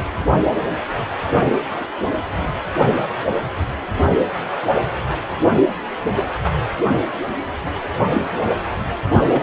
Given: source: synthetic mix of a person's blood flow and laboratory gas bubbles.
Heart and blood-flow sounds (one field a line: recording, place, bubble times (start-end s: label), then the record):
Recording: Doppler ultrasound of blood flow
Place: precordium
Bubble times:
9.22-9.43 s: bubbles
From the record:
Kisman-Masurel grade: 221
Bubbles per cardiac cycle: several, 3 to 8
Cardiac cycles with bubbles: 10 to 50%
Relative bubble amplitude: barely perceptible (0.100 to 0.250)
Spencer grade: 2 (many but less than half of the cardiac periods contain bubble signals, singularly or in groups)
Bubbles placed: only in the low amplitude regions of the cardiac cycle